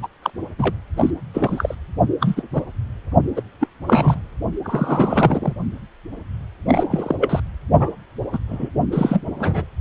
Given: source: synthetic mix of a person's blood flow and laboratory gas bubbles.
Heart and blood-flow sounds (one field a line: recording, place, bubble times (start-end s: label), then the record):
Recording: Doppler ultrasound of blood flow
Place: precordium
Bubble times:
0.02-0.08 s: bubbles
0.22-0.30 s: bubbles
0.58-0.74 s: bubbles
0.96-1.10 s: bubbles
1.33-1.75 s: bubbles
2.20-2.43 s: bubbles
2.51-2.62 s: bubbles
3.36-3.42 s: bubbles
3.60-3.68 s: bubbles
3.86-4.21 s: bubbles
4.64-5.54 s: bubbles
6.65-7.16 s: bubbles
7.20-7.40 s: bubbles
7.79-7.90 s: bubbles
8.32-8.39 s: bubbles
8.49-8.69 s: bubbles
8.92-9.23 s: bubbles
9.39-9.65 s: bubbles
From the record:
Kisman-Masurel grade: 243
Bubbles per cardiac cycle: several, 3 to 8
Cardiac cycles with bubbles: 100%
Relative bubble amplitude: loud (0.450 to 0.775)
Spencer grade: 3 (all of the cardiac periods contain showers or single bubble signals, but not dominating or overriding the cardiac motion signals)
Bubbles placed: only in the low amplitude regions of the cardiac cycle